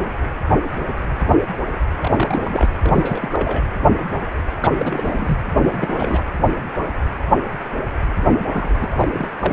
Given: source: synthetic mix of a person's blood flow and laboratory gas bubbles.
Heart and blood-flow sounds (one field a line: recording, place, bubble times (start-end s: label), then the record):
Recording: Doppler ultrasound of blood flow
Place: precordium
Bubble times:
2.01-2.41 s: bubbles
2.44-2.78 s: bubbles
2.83-3.64 s: bubbles
4.54-5.38 s: bubbles
5.62-6.25 s: bubbles
8.53-9.30 s: bubbles
9.39-9.53 s: bubbles
From the record:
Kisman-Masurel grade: 332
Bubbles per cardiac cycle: rolling drumbeat, 9 or more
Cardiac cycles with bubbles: 50 to 99%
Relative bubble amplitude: moderate (0.250 to 0.450)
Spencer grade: 3 (all of the cardiac periods contain showers or single bubble signals, but not dominating or overriding the cardiac motion signals)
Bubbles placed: anywhere in the cardiac cycle